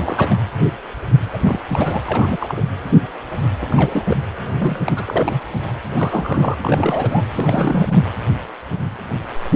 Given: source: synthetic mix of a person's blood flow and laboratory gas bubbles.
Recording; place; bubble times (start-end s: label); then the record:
Doppler ultrasound of blood flow; precordium
0.00-0.38 s: bubbles
1.32-1.39 s: bubbles
1.44-1.57 s: bubbles
1.68-2.01 s: bubbles
2.06-2.62 s: bubbles
3.61-3.66 s: bubbles
3.70-4.05 s: bubbles
4.08-4.17 s: bubbles
4.58-4.83 s: bubbles
4.87-5.42 s: bubbles
5.95-6.54 s: bubbles
6.61-7.23 s: bubbles
7.30-8.04 s: bubbles
From the record:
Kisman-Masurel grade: 332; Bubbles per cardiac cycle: rolling drumbeat, 9 or more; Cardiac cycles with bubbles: 50 to 99%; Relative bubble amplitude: moderate (0.250 to 0.450); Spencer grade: 3 (all of the cardiac periods contain showers or single bubble signals, but not dominating or overriding the cardiac motion signals); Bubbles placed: anywhere in the cardiac cycle